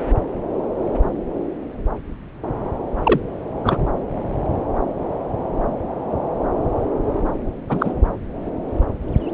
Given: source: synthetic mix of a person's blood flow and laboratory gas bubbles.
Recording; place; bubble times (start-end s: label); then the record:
Doppler ultrasound of blood flow; subclavian vein
3.03-3.21 s: bubbles
3.64-3.77 s: bubbles
7.69-7.93 s: bubbles
From the record:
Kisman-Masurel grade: 223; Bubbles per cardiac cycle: several, 3 to 8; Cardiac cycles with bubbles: 10 to 50%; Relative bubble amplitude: loud (0.450 to 0.775); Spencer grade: 2 (many but less than half of the cardiac periods contain bubble signals, singularly or in groups); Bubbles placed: anywhere in the cardiac cycle